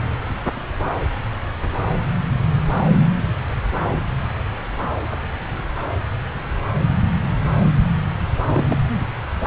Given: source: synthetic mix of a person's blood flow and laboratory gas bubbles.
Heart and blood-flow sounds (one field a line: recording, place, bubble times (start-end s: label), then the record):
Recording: Doppler ultrasound of blood flow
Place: subclavian vein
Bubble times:
8.44-8.76 s: bubbles
From the record:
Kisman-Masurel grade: 112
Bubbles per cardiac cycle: 1 to 2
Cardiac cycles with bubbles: 1 to 10%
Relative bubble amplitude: moderate (0.250 to 0.450)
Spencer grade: 1 (occasional bubble signal discernible with the cardiac motion signal, with majority of cardiac periods free of bubbles)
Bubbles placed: anywhere in the cardiac cycle